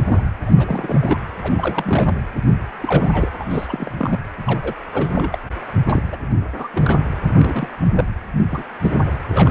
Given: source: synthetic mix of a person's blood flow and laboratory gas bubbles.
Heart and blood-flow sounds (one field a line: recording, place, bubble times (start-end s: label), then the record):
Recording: Doppler ultrasound of blood flow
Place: precordium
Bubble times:
0.05-0.21 s: bubbles
0.46-0.51 s: bubbles
0.55-1.17 s: bubbles
1.40-2.18 s: bubbles
2.81-3.31 s: bubbles
3.39-3.44 s: bubbles
3.50-3.91 s: bubbles
3.98-4.17 s: bubbles
4.46-4.59 s: bubbles
4.62-4.73 s: bubbles
4.92-5.38 s: bubbles
5.87-6.02 s: bubbles
6.12-6.16 s: bubbles
6.56-6.68 s: bubbles
6.73-6.99 s: bubbles
7.28-7.68 s: bubbles
7.95-8.04 s: bubbles
8.51-8.63 s: bubbles
8.81-8.98 s: bubbles
9.31-9.51 s: bubbles
From the record:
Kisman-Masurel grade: 242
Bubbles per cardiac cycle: several, 3 to 8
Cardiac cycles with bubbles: 100%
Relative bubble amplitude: moderate (0.250 to 0.450)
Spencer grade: 3 (all of the cardiac periods contain showers or single bubble signals, but not dominating or overriding the cardiac motion signals)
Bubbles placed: anywhere in the cardiac cycle